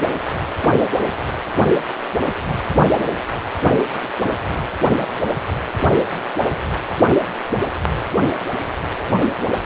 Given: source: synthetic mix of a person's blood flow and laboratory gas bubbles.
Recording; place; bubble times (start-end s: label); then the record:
Doppler ultrasound of blood flow; precordium
no bubbles
From the record:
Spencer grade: 0 (complete lack of bubble signals)